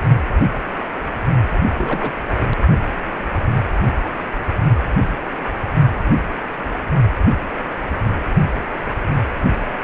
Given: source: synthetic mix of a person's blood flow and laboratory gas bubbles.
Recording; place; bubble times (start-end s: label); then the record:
Doppler ultrasound of blood flow; precordium
1.74-2.14 s: bubbles
2.40-2.47 s: bubbles
From the record:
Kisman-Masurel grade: 211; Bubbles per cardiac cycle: several, 3 to 8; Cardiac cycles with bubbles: 1 to 10%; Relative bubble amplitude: barely perceptible (0.100 to 0.250); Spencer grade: 1 (occasional bubble signal discernible with the cardiac motion signal, with majority of cardiac periods free of bubbles); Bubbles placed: only in the low amplitude regions of the cardiac cycle